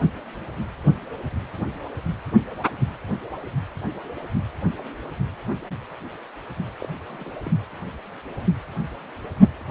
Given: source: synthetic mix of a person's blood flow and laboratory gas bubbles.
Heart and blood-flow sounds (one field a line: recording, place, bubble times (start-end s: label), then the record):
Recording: Doppler ultrasound of blood flow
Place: precordium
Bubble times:
6.82-6.86 s: bubbles
7.08-7.30 s: bubbles
7.43-7.50 s: bubbles
From the record:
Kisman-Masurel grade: 211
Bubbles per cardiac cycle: several, 3 to 8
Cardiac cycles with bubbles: 1 to 10%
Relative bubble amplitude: barely perceptible (0.100 to 0.250)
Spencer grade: 1 (occasional bubble signal discernible with the cardiac motion signal, with majority of cardiac periods free of bubbles)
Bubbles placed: anywhere in the cardiac cycle